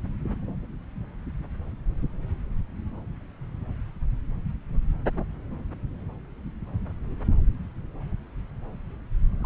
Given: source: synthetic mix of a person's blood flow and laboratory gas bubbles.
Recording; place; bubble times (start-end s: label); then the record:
Doppler ultrasound of blood flow; subclavian vein
9.40-9.46 s: bubbles
From the record:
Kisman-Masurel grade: 111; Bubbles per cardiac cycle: 1 to 2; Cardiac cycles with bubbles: 1 to 10%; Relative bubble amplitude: barely perceptible (0.100 to 0.250); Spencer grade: 1 (occasional bubble signal discernible with the cardiac motion signal, with majority of cardiac periods free of bubbles); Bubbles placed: anywhere in the cardiac cycle